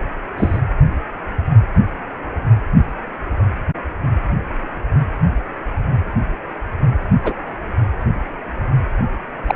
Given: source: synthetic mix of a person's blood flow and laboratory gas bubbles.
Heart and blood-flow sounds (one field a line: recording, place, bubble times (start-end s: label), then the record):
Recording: Doppler ultrasound of blood flow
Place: precordium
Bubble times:
0.37-0.61 s: bubbles
7.24-7.35 s: bubbles
9.48-9.55 s: bubbles
From the record:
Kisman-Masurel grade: 122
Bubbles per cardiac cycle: 1 to 2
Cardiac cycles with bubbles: 10 to 50%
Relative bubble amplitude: moderate (0.250 to 0.450)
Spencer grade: 2 (many but less than half of the cardiac periods contain bubble signals, singularly or in groups)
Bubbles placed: anywhere in the cardiac cycle